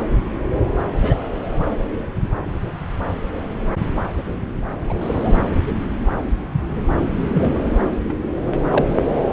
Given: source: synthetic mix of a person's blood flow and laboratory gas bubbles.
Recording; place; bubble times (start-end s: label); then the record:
Doppler ultrasound of blood flow; subclavian vein
1.00-1.17 s: bubbles
4.87-4.93 s: bubbles
5.01-5.36 s: bubbles
7.33-7.53 s: bubbles
8.08-8.13 s: bubbles
8.46-8.63 s: bubbles
8.71-8.99 s: bubbles
From the record:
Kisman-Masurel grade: 122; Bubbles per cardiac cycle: 1 to 2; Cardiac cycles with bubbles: 10 to 50%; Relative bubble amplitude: moderate (0.250 to 0.450); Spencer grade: 2 (many but less than half of the cardiac periods contain bubble signals, singularly or in groups); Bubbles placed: anywhere in the cardiac cycle